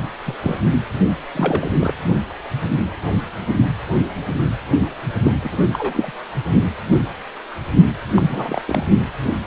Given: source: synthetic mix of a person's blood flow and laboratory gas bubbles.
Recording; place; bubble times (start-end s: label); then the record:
Doppler ultrasound of blood flow; precordium
0.25-0.35 s: bubbles
0.41-0.60 s: bubbles
1.34-1.70 s: bubbles
1.80-1.93 s: bubbles
5.23-5.33 s: bubbles
5.43-5.49 s: bubbles
5.51-5.56 s: bubbles
5.73-6.12 s: bubbles
8.15-8.62 s: bubbles
8.65-8.84 s: bubbles
From the record:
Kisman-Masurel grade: 232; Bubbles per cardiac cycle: several, 3 to 8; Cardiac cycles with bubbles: 50 to 99%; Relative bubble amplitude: moderate (0.250 to 0.450); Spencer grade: 3 (all of the cardiac periods contain showers or single bubble signals, but not dominating or overriding the cardiac motion signals); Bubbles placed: only in the low amplitude regions of the cardiac cycle